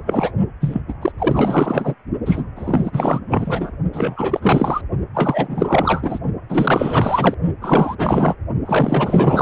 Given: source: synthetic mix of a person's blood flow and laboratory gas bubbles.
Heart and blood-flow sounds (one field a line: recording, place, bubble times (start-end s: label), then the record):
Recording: Doppler ultrasound of blood flow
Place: precordium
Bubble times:
0.00-0.31 s: bubbles
0.60-0.82 s: bubbles
0.88-0.94 s: bubbles
1.02-1.12 s: bubbles
1.18-1.94 s: bubbles
2.25-2.44 s: bubbles
2.56-3.20 s: bubbles
3.27-3.71 s: bubbles
3.93-4.82 s: bubbles
5.14-6.19 s: bubbles
6.49-7.37 s: bubbles
7.61-7.96 s: bubbles
7.98-8.35 s: bubbles
8.65-9.42 s: bubbles
From the record:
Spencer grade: 4 (maximum detectable bubble signal sounding continuously throughout systole and diastole of every cardiac period, and overriding the amplitude of the normal cardiac signals)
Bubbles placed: only in the low amplitude regions of the cardiac cycle